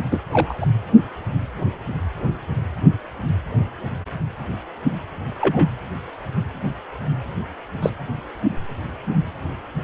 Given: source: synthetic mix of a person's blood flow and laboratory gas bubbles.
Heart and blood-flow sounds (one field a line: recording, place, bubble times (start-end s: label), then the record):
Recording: Doppler ultrasound of blood flow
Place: precordium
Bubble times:
0.11-0.20 s: bubbles
0.33-0.66 s: bubbles
5.41-5.70 s: bubbles
7.82-7.90 s: bubbles
From the record:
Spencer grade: 2 (many but less than half of the cardiac periods contain bubble signals, singularly or in groups)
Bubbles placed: anywhere in the cardiac cycle